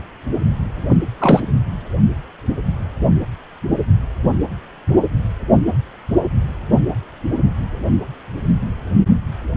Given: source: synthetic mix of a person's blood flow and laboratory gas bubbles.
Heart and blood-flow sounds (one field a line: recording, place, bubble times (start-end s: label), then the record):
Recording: Doppler ultrasound of blood flow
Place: precordium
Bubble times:
0.89-0.97 s: bubbles
1.18-1.41 s: bubbles
From the record:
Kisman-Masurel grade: 213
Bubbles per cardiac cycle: several, 3 to 8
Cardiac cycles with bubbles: 1 to 10%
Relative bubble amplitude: loud (0.450 to 0.775)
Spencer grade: 1 (occasional bubble signal discernible with the cardiac motion signal, with majority of cardiac periods free of bubbles)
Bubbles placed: anywhere in the cardiac cycle